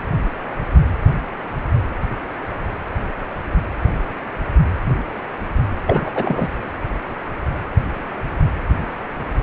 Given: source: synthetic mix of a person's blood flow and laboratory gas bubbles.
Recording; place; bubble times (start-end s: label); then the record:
Doppler ultrasound of blood flow; precordium
5.85-6.09 s: bubbles
6.14-6.47 s: bubbles
From the record:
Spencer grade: 1 (occasional bubble signal discernible with the cardiac motion signal, with majority of cardiac periods free of bubbles); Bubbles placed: anywhere in the cardiac cycle